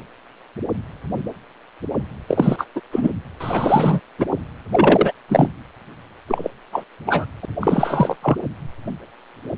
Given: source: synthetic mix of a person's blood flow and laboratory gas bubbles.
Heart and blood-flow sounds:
Doppler ultrasound of blood flow; precordium
2.28-2.65 s: bubbles
2.75-2.80 s: bubbles
2.92-3.10 s: bubbles
3.40-4.00 s: bubbles
4.18-4.26 s: bubbles
4.72-5.12 s: bubbles
5.29-5.47 s: bubbles
6.28-6.49 s: bubbles
6.72-6.83 s: bubbles
7.06-7.25 s: bubbles
7.42-7.46 s: bubbles
7.60-8.16 s: bubbles
8.22-8.37 s: bubbles
From the record:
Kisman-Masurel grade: 233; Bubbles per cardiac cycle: several, 3 to 8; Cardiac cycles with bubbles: 50 to 99%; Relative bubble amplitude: loud (0.450 to 0.775); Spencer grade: 3 (all of the cardiac periods contain showers or single bubble signals, but not dominating or overriding the cardiac motion signals); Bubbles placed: anywhere in the cardiac cycle

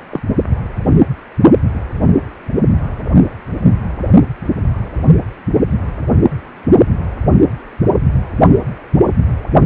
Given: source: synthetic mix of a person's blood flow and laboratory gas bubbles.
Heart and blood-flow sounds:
Doppler ultrasound of blood flow; precordium
0.10-0.20 s: bubbles
From the record:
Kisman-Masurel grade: 212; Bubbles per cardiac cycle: several, 3 to 8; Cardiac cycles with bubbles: 1 to 10%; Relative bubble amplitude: moderate (0.250 to 0.450); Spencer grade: 1 (occasional bubble signal discernible with the cardiac motion signal, with majority of cardiac periods free of bubbles); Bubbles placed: only in the low amplitude regions of the cardiac cycle

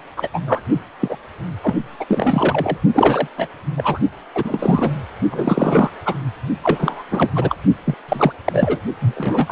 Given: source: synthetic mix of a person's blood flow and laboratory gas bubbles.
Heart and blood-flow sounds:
Doppler ultrasound of blood flow; precordium
0.00-0.02 s: bubbles
0.17-0.30 s: bubbles
0.33-0.41 s: bubbles
0.46-0.62 s: bubbles
0.70-0.80 s: bubbles
0.99-1.17 s: bubbles
1.62-1.75 s: bubbles
1.99-2.06 s: bubbles
2.09-2.78 s: bubbles
2.94-3.28 s: bubbles
3.37-3.48 s: bubbles
3.77-4.00 s: bubbles
4.34-4.92 s: bubbles
5.30-5.89 s: bubbles
6.05-6.15 s: bubbles
6.62-7.03 s: bubbles
7.11-7.30 s: bubbles
7.35-7.55 s: bubbles
7.84-7.94 s: bubbles
8.09-8.33 s: bubbles
8.45-8.81 s: bubbles
9.00-9.52 s: bubbles
From the record:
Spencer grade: 3 (all of the cardiac periods contain showers or single bubble signals, but not dominating or overriding the cardiac motion signals); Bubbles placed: only in the low amplitude regions of the cardiac cycle

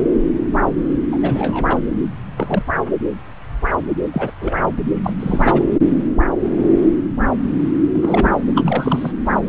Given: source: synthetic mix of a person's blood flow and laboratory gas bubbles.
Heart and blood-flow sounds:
Doppler ultrasound of blood flow; subclavian vein
1.12-1.19 s: bubbles
1.22-1.78 s: bubbles
2.37-2.62 s: bubbles
4.13-4.32 s: bubbles
4.40-4.54 s: bubbles
5.03-5.13 s: bubbles
5.20-5.63 s: bubbles
7.93-8.31 s: bubbles
8.55-9.12 s: bubbles
From the record:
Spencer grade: 2 (many but less than half of the cardiac periods contain bubble signals, singularly or in groups); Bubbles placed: anywhere in the cardiac cycle

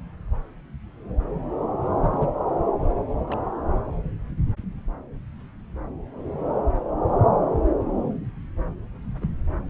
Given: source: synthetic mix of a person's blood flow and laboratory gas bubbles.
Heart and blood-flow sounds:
Doppler ultrasound of blood flow; subclavian vein
1.99-2.29 s: bubbles
3.27-3.36 s: bubbles
9.21-9.30 s: bubbles
From the record:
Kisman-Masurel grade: 121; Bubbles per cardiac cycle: 1 to 2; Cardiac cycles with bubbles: 10 to 50%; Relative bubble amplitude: barely perceptible (0.100 to 0.250); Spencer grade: 2 (many but less than half of the cardiac periods contain bubble signals, singularly or in groups); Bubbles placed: anywhere in the cardiac cycle

